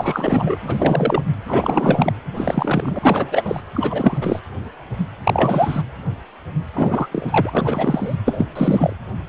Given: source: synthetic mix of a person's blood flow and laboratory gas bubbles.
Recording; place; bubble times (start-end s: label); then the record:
Doppler ultrasound of blood flow; precordium
0.00-0.56 s: bubbles
0.61-1.22 s: bubbles
1.46-2.12 s: bubbles
2.34-2.99 s: bubbles
3.02-3.60 s: bubbles
3.74-4.18 s: bubbles
4.21-4.39 s: bubbles
5.23-5.83 s: bubbles
6.73-7.09 s: bubbles
7.12-8.16 s: bubbles
8.25-8.49 s: bubbles
8.55-8.93 s: bubbles
From the record:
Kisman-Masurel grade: 333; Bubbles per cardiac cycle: rolling drumbeat, 9 or more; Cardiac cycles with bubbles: 50 to 99%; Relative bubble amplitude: loud (0.450 to 0.775); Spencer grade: 3 (all of the cardiac periods contain showers or single bubble signals, but not dominating or overriding the cardiac motion signals); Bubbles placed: anywhere in the cardiac cycle